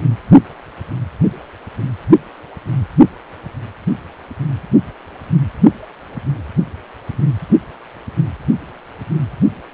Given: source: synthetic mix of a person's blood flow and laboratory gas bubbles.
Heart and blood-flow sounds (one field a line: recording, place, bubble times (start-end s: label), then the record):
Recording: Doppler ultrasound of blood flow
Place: precordium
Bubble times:
no bubbles
From the record:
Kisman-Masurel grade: 000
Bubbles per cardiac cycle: 0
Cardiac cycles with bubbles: 0%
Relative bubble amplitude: no bubbles discernible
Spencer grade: 0 (complete lack of bubble signals)